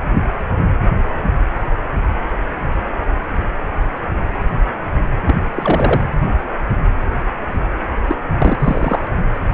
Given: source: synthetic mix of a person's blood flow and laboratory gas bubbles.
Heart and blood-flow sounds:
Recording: Doppler ultrasound of blood flow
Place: precordium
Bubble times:
5.25-5.35 s: bubbles
5.44-5.49 s: bubbles
5.54-6.09 s: bubbles
8.07-8.16 s: bubbles
8.27-8.55 s: bubbles
8.60-9.16 s: bubbles
From the record:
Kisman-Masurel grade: 222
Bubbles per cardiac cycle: several, 3 to 8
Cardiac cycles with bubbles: 10 to 50%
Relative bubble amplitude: moderate (0.250 to 0.450)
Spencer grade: 2 (many but less than half of the cardiac periods contain bubble signals, singularly or in groups)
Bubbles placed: anywhere in the cardiac cycle

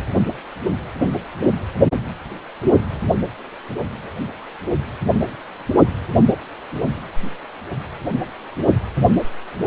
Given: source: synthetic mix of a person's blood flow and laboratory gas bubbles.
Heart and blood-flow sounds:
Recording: Doppler ultrasound of blood flow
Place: precordium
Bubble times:
no bubbles
From the record:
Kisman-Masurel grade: 000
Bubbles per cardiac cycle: 0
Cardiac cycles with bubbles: 0%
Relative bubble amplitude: no bubbles discernible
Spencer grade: 0 (complete lack of bubble signals)

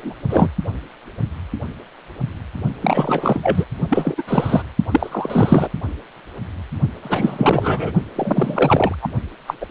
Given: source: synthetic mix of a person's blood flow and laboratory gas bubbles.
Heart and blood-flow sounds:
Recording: Doppler ultrasound of blood flow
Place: precordium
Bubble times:
0.00-0.14 s: bubbles
0.29-0.47 s: bubbles
2.81-3.65 s: bubbles
3.90-4.22 s: bubbles
4.27-4.63 s: bubbles
4.91-5.69 s: bubbles
7.02-7.92 s: bubbles
8.15-8.95 s: bubbles
9.02-9.09 s: bubbles
9.47-9.54 s: bubbles
9.61-9.66 s: bubbles
From the record:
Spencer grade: 3 (all of the cardiac periods contain showers or single bubble signals, but not dominating or overriding the cardiac motion signals)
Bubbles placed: only in the low amplitude regions of the cardiac cycle

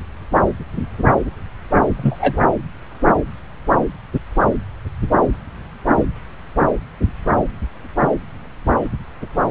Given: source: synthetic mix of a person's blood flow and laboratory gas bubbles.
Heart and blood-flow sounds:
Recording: Doppler ultrasound of blood flow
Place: subclavian vein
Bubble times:
1.97-2.42 s: bubbles
From the record:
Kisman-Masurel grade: 113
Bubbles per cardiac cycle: 1 to 2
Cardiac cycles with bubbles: 1 to 10%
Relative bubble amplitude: loud (0.450 to 0.775)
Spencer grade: 1 (occasional bubble signal discernible with the cardiac motion signal, with majority of cardiac periods free of bubbles)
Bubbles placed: anywhere in the cardiac cycle

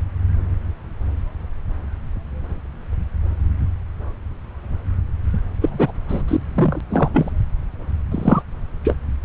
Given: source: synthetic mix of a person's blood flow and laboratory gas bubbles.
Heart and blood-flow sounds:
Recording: Doppler ultrasound of blood flow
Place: subclavian vein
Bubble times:
5.32-5.40 s: bubbles
5.61-5.92 s: bubbles
6.08-6.22 s: bubbles
6.28-6.37 s: bubbles
6.55-6.80 s: bubbles
6.89-7.09 s: bubbles
7.13-7.30 s: bubbles
8.11-8.42 s: bubbles
8.84-8.95 s: bubbles
From the record:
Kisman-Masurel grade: 233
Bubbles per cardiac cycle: several, 3 to 8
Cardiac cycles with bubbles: 50 to 99%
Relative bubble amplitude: loud (0.450 to 0.775)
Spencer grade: 3 (all of the cardiac periods contain showers or single bubble signals, but not dominating or overriding the cardiac motion signals)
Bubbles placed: anywhere in the cardiac cycle

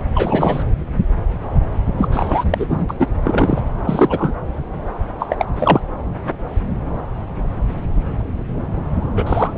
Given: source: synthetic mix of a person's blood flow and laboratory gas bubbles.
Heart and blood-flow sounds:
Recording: Doppler ultrasound of blood flow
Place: subclavian vein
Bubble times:
0.15-0.63 s: bubbles
1.97-2.45 s: bubbles
2.50-2.66 s: bubbles
2.69-2.94 s: bubbles
2.99-3.07 s: bubbles
3.24-3.62 s: bubbles
3.84-4.33 s: bubbles
5.19-5.45 s: bubbles
5.55-5.80 s: bubbles
9.15-9.52 s: bubbles
9.55-9.58 s: bubbles
From the record:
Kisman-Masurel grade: 233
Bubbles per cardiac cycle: several, 3 to 8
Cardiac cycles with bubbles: 50 to 99%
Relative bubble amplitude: loud (0.450 to 0.775)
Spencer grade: 3 (all of the cardiac periods contain showers or single bubble signals, but not dominating or overriding the cardiac motion signals)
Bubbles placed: anywhere in the cardiac cycle

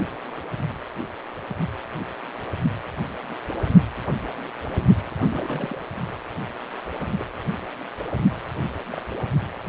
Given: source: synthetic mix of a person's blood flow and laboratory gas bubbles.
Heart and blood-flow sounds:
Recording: Doppler ultrasound of blood flow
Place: precordium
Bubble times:
5.31-5.83 s: bubbles
7.18-7.29 s: bubbles
8.93-9.02 s: bubbles
From the record:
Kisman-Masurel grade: 121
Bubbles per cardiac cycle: 1 to 2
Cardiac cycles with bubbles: 10 to 50%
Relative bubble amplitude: barely perceptible (0.100 to 0.250)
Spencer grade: 2 (many but less than half of the cardiac periods contain bubble signals, singularly or in groups)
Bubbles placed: only in the low amplitude regions of the cardiac cycle

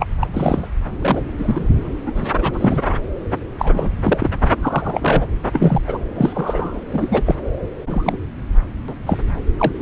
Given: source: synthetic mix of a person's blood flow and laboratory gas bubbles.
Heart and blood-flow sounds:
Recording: Doppler ultrasound of blood flow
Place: subclavian vein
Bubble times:
0.00-0.07 s: bubbles
0.21-0.27 s: bubbles
0.33-0.68 s: bubbles
1.02-1.21 s: bubbles
1.38-1.68 s: bubbles
1.76-1.94 s: bubbles
2.06-2.11 s: bubbles
2.15-2.27 s: bubbles
2.36-2.82 s: bubbles
3.58-3.90 s: bubbles
4.04-4.30 s: bubbles
4.42-4.50 s: bubbles
4.62-5.26 s: bubbles
5.53-5.81 s: bubbles
5.87-5.98 s: bubbles
6.16-6.80 s: bubbles
6.92-7.35 s: bubbles
7.87-8.18 s: bubbles
8.88-8.94 s: bubbles
9.06-9.18 s: bubbles
9.57-9.72 s: bubbles
From the record:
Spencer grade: 3 (all of the cardiac periods contain showers or single bubble signals, but not dominating or overriding the cardiac motion signals)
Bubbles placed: anywhere in the cardiac cycle

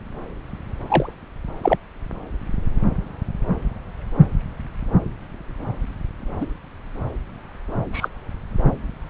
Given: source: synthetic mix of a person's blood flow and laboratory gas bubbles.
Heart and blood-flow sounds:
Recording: Doppler ultrasound of blood flow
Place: subclavian vein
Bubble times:
0.86-1.15 s: bubbles
1.63-1.77 s: bubbles
6.41-6.47 s: bubbles
7.92-8.08 s: bubbles
From the record:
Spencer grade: 2 (many but less than half of the cardiac periods contain bubble signals, singularly or in groups)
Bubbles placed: anywhere in the cardiac cycle

